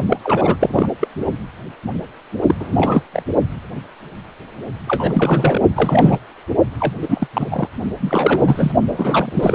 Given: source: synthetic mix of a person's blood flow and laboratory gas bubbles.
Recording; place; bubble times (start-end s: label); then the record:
Doppler ultrasound of blood flow; precordium
0.10-0.18 s: bubbles
0.24-0.57 s: bubbles
0.60-0.89 s: bubbles
1.00-1.07 s: bubbles
2.46-2.54 s: bubbles
2.60-3.02 s: bubbles
3.13-3.23 s: bubbles
4.87-5.61 s: bubbles
5.76-6.19 s: bubbles
6.80-6.94 s: bubbles
7.02-7.28 s: bubbles
7.33-7.47 s: bubbles
7.51-7.68 s: bubbles
8.02-8.71 s: bubbles
8.88-9.55 s: bubbles
From the record:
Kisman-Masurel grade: 333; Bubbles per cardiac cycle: rolling drumbeat, 9 or more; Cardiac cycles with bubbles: 50 to 99%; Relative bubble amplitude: loud (0.450 to 0.775); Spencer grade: 3 (all of the cardiac periods contain showers or single bubble signals, but not dominating or overriding the cardiac motion signals); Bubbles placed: only in the low amplitude regions of the cardiac cycle